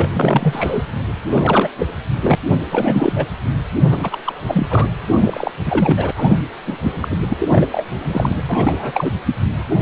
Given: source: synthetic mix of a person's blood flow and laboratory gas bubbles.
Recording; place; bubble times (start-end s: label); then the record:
Doppler ultrasound of blood flow; precordium
0.00-0.10 s: bubbles
0.12-0.86 s: bubbles
1.31-1.70 s: bubbles
1.78-1.89 s: bubbles
2.22-2.35 s: bubbles
2.51-2.57 s: bubbles
2.71-3.31 s: bubbles
3.85-4.18 s: bubbles
4.25-4.33 s: bubbles
4.46-4.67 s: bubbles
4.69-4.86 s: bubbles
5.08-5.54 s: bubbles
5.65-6.11 s: bubbles
6.16-6.38 s: bubbles
6.66-6.77 s: bubbles
6.83-6.92 s: bubbles
7.00-7.17 s: bubbles
7.28-7.67 s: bubbles
7.72-7.84 s: bubbles
8.03-8.35 s: bubbles
8.48-8.92 s: bubbles
8.95-9.13 s: bubbles
9.71-9.75 s: bubbles
From the record:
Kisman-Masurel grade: 343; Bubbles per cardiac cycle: rolling drumbeat, 9 or more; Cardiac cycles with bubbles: 100%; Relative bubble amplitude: loud (0.450 to 0.775); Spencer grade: 3 (all of the cardiac periods contain showers or single bubble signals, but not dominating or overriding the cardiac motion signals); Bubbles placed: anywhere in the cardiac cycle